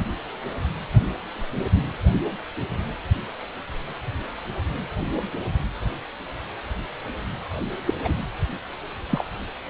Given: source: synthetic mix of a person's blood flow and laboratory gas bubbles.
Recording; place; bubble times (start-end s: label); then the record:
Doppler ultrasound of blood flow; precordium
7.86-7.93 s: bubbles
8.04-8.14 s: bubbles
9.10-9.25 s: bubbles
From the record:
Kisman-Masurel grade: 212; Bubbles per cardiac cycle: several, 3 to 8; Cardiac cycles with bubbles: 1 to 10%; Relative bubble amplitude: moderate (0.250 to 0.450); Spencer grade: 1 (occasional bubble signal discernible with the cardiac motion signal, with majority of cardiac periods free of bubbles); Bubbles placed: anywhere in the cardiac cycle